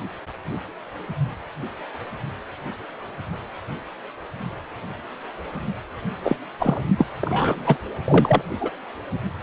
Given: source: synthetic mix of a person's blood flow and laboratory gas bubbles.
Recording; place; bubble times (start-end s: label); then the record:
Doppler ultrasound of blood flow; precordium
6.23-6.37 s: bubbles
6.58-6.79 s: bubbles
6.98-7.05 s: bubbles
7.21-7.77 s: bubbles
8.07-8.41 s: bubbles
8.61-8.70 s: bubbles
From the record:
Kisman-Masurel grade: 222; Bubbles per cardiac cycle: several, 3 to 8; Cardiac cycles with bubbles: 10 to 50%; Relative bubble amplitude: moderate (0.250 to 0.450); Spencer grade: 2 (many but less than half of the cardiac periods contain bubble signals, singularly or in groups); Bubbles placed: anywhere in the cardiac cycle